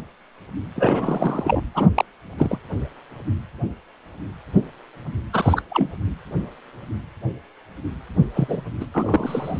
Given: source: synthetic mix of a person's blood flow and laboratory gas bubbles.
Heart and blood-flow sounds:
Doppler ultrasound of blood flow; precordium
0.76-1.61 s: bubbles
1.74-1.89 s: bubbles
1.95-2.05 s: bubbles
2.38-2.57 s: bubbles
5.33-5.62 s: bubbles
5.70-5.88 s: bubbles
8.35-8.62 s: bubbles
8.80-8.86 s: bubbles
8.94-9.59 s: bubbles
From the record:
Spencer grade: 2 (many but less than half of the cardiac periods contain bubble signals, singularly or in groups); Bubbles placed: anywhere in the cardiac cycle

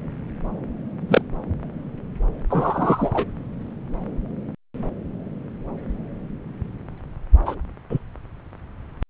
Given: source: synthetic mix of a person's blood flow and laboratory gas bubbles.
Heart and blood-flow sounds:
Doppler ultrasound of blood flow; subclavian vein
1.08-1.21 s: bubbles
2.50-3.25 s: bubbles
7.46-7.55 s: bubbles
7.90-7.99 s: bubbles
From the record:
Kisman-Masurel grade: 123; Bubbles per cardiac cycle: 1 to 2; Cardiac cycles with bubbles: 10 to 50%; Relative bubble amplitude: loud (0.450 to 0.775); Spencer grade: 2 (many but less than half of the cardiac periods contain bubble signals, singularly or in groups); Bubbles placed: anywhere in the cardiac cycle

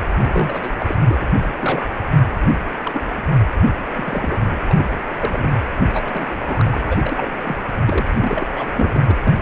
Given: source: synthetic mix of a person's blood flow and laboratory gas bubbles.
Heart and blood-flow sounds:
Doppler ultrasound of blood flow; precordium
0.22-0.74 s: bubbles
0.78-0.95 s: bubbles
1.08-1.16 s: bubbles
1.20-1.26 s: bubbles
1.42-1.48 s: bubbles
1.59-1.83 s: bubbles
2.83-3.02 s: bubbles
3.17-3.21 s: bubbles
3.67-3.73 s: bubbles
3.95-4.61 s: bubbles
4.68-4.89 s: bubbles
5.18-5.61 s: bubbles
5.93-6.02 s: bubbles
6.04-6.42 s: bubbles
6.47-6.80 s: bubbles
6.83-6.98 s: bubbles
7.02-7.31 s: bubbles
7.43-7.63 s: bubbles
7.85-8.06 s: bubbles
8.19-8.47 s: bubbles
8.55-9.01 s: bubbles
9.04-9.18 s: bubbles
9.23-9.34 s: bubbles
From the record:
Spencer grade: 3 (all of the cardiac periods contain showers or single bubble signals, but not dominating or overriding the cardiac motion signals); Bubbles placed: anywhere in the cardiac cycle

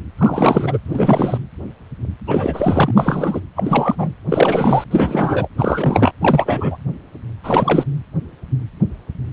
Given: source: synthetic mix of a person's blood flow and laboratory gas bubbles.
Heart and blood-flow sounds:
Doppler ultrasound of blood flow; precordium
0.17-0.78 s: bubbles
0.85-1.38 s: bubbles
2.25-3.40 s: bubbles
3.55-3.96 s: bubbles
3.98-4.12 s: bubbles
4.29-4.84 s: bubbles
4.91-5.48 s: bubbles
5.58-6.12 s: bubbles
6.21-6.77 s: bubbles
7.43-7.85 s: bubbles
From the record:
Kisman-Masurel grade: 333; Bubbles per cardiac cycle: rolling drumbeat, 9 or more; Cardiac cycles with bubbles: 50 to 99%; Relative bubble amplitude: loud (0.450 to 0.775); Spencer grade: 3 (all of the cardiac periods contain showers or single bubble signals, but not dominating or overriding the cardiac motion signals); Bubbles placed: anywhere in the cardiac cycle

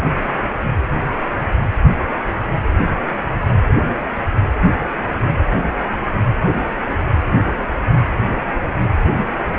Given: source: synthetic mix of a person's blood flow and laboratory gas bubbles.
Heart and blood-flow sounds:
Doppler ultrasound of blood flow; precordium
8.63-8.71 s: bubbles
From the record:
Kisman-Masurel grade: 111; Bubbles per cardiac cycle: 1 to 2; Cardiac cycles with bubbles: 1 to 10%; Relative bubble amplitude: barely perceptible (0.100 to 0.250); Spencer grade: 1 (occasional bubble signal discernible with the cardiac motion signal, with majority of cardiac periods free of bubbles); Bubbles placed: anywhere in the cardiac cycle

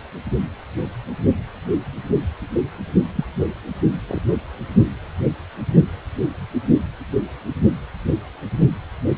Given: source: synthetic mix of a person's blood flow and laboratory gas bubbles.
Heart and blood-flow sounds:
Doppler ultrasound of blood flow; precordium
3.16-3.25 s: bubbles
4.07-4.22 s: bubbles
From the record:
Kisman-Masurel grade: 112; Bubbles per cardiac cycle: 1 to 2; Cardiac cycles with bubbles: 1 to 10%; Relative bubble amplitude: moderate (0.250 to 0.450); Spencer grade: 1 (occasional bubble signal discernible with the cardiac motion signal, with majority of cardiac periods free of bubbles); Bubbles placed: anywhere in the cardiac cycle

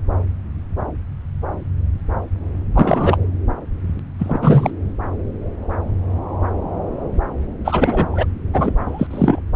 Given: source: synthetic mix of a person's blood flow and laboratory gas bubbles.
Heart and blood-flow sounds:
Doppler ultrasound of blood flow; subclavian vein
2.73-3.17 s: bubbles
4.19-4.71 s: bubbles
7.64-8.25 s: bubbles
8.53-9.08 s: bubbles
9.11-9.40 s: bubbles
From the record:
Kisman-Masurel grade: 223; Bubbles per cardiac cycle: several, 3 to 8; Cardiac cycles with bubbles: 10 to 50%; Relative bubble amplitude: loud (0.450 to 0.775); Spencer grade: 2 (many but less than half of the cardiac periods contain bubble signals, singularly or in groups); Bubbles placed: anywhere in the cardiac cycle

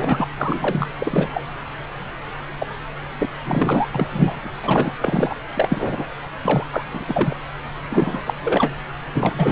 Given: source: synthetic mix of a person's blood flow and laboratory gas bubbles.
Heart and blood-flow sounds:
Doppler ultrasound of blood flow; subclavian vein
0.00-0.27 s: bubbles
0.37-0.87 s: bubbles
0.99-1.47 s: bubbles
2.59-2.67 s: bubbles
3.18-3.25 s: bubbles
3.44-3.87 s: bubbles
3.91-4.50 s: bubbles
4.62-4.96 s: bubbles
5.00-5.35 s: bubbles
5.54-6.06 s: bubbles
6.43-6.67 s: bubbles
6.71-6.83 s: bubbles
6.91-7.05 s: bubbles
7.08-7.35 s: bubbles
7.90-8.22 s: bubbles
8.25-8.34 s: bubbles
8.43-8.75 s: bubbles
9.12-9.52 s: bubbles
From the record:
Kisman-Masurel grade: 233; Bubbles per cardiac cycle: several, 3 to 8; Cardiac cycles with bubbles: 50 to 99%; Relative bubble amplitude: loud (0.450 to 0.775); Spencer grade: 3 (all of the cardiac periods contain showers or single bubble signals, but not dominating or overriding the cardiac motion signals); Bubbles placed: anywhere in the cardiac cycle

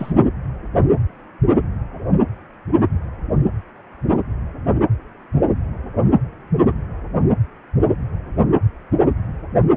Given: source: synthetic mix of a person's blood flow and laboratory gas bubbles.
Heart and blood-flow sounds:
Doppler ultrasound of blood flow; precordium
0.00-0.12 s: bubbles
From the record:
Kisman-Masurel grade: 111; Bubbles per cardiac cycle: 1 to 2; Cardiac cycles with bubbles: 1 to 10%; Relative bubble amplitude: barely perceptible (0.100 to 0.250); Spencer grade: 1 (occasional bubble signal discernible with the cardiac motion signal, with majority of cardiac periods free of bubbles); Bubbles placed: anywhere in the cardiac cycle

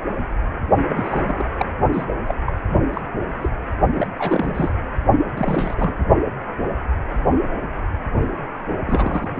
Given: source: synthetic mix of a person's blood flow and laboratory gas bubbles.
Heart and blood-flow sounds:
Doppler ultrasound of blood flow; precordium
0.89-1.45 s: bubbles
1.58-1.66 s: bubbles
1.92-2.04 s: bubbles
2.26-2.34 s: bubbles
2.46-2.53 s: bubbles
2.69-2.77 s: bubbles
2.94-3.01 s: bubbles
3.41-3.49 s: bubbles
3.93-4.07 s: bubbles
4.18-4.73 s: bubbles
5.36-5.74 s: bubbles
5.77-5.95 s: bubbles
8.85-9.31 s: bubbles
9.36-9.40 s: bubbles
From the record:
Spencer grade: 3 (all of the cardiac periods contain showers or single bubble signals, but not dominating or overriding the cardiac motion signals); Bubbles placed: only in the low amplitude regions of the cardiac cycle

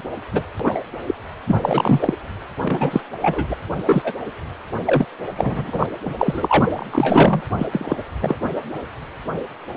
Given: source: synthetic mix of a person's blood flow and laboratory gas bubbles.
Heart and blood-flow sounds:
Doppler ultrasound of blood flow; precordium
0.33-0.42 s: bubbles
0.59-0.81 s: bubbles
1.06-1.15 s: bubbles
1.46-1.56 s: bubbles
1.62-2.13 s: bubbles
2.58-3.00 s: bubbles
3.21-3.55 s: bubbles
3.86-4.13 s: bubbles
4.86-5.05 s: bubbles
5.35-5.87 s: bubbles
6.05-6.14 s: bubbles
6.18-6.65 s: bubbles
6.72-7.42 s: bubbles
7.58-7.67 s: bubbles
7.71-7.98 s: bubbles
8.22-8.36 s: bubbles
From the record:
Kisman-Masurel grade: 233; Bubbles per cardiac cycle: several, 3 to 8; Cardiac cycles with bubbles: 50 to 99%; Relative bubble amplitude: loud (0.450 to 0.775); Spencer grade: 3 (all of the cardiac periods contain showers or single bubble signals, but not dominating or overriding the cardiac motion signals); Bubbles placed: anywhere in the cardiac cycle

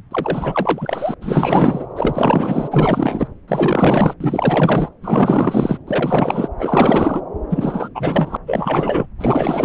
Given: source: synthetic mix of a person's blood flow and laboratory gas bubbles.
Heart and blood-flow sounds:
Doppler ultrasound of blood flow; subclavian vein
0.11-1.15 s: bubbles
1.21-1.86 s: bubbles
1.96-3.27 s: bubbles
3.47-4.14 s: bubbles
4.20-4.90 s: bubbles
5.02-5.78 s: bubbles
5.87-6.48 s: bubbles
6.58-7.21 s: bubbles
7.50-7.88 s: bubbles
7.95-8.37 s: bubbles
8.46-9.06 s: bubbles
9.20-9.65 s: bubbles
From the record:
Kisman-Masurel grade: 444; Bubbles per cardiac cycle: continuous sound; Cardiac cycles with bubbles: 100%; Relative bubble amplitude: maximal (0.775 to 0.999); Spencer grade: 4 (maximum detectable bubble signal sounding continuously throughout systole and diastole of every cardiac period, and overriding the amplitude of the normal cardiac signals); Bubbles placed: anywhere in the cardiac cycle

